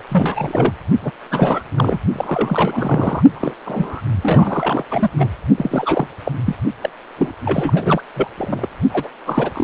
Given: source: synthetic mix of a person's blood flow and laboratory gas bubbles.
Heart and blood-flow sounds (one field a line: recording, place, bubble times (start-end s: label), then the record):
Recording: Doppler ultrasound of blood flow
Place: precordium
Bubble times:
0.09-0.73 s: bubbles
1.02-1.10 s: bubbles
1.31-1.63 s: bubbles
1.76-1.99 s: bubbles
2.13-3.23 s: bubbles
3.34-3.54 s: bubbles
3.65-4.01 s: bubbles
4.22-4.85 s: bubbles
4.90-5.10 s: bubbles
5.17-5.29 s: bubbles
5.56-6.07 s: bubbles
6.25-6.32 s: bubbles
6.44-6.55 s: bubbles
6.81-6.89 s: bubbles
7.18-7.33 s: bubbles
7.44-8.02 s: bubbles
8.16-8.28 s: bubbles
8.38-8.67 s: bubbles
8.90-9.09 s: bubbles
9.26-9.64 s: bubbles
From the record:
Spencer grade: 3 (all of the cardiac periods contain showers or single bubble signals, but not dominating or overriding the cardiac motion signals)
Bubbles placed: only in the low amplitude regions of the cardiac cycle